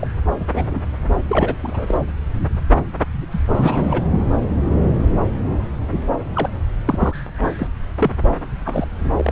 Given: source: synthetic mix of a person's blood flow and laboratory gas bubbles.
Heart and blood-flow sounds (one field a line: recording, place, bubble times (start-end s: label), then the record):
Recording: Doppler ultrasound of blood flow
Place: subclavian vein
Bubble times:
0.00-0.07 s: bubbles
0.40-0.46 s: bubbles
0.54-0.83 s: bubbles
1.27-1.55 s: bubbles
1.63-1.98 s: bubbles
3.31-3.44 s: bubbles
3.48-4.07 s: bubbles
6.34-6.49 s: bubbles
6.85-7.13 s: bubbles
7.56-7.67 s: bubbles
7.98-8.11 s: bubbles
8.65-8.87 s: bubbles
9.16-9.32 s: bubbles
From the record:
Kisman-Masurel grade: 232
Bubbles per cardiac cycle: several, 3 to 8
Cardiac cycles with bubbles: 50 to 99%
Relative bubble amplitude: moderate (0.250 to 0.450)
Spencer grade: 3 (all of the cardiac periods contain showers or single bubble signals, but not dominating or overriding the cardiac motion signals)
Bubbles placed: anywhere in the cardiac cycle